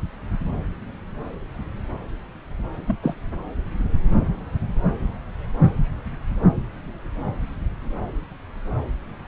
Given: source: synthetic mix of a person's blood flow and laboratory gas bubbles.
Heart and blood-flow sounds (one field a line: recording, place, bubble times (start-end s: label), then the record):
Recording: Doppler ultrasound of blood flow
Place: subclavian vein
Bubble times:
2.87-2.95 s: bubbles
3.02-3.15 s: bubbles
From the record:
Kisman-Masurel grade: 112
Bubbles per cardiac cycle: 1 to 2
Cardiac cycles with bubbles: 1 to 10%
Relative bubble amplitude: moderate (0.250 to 0.450)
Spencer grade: 1 (occasional bubble signal discernible with the cardiac motion signal, with majority of cardiac periods free of bubbles)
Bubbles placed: anywhere in the cardiac cycle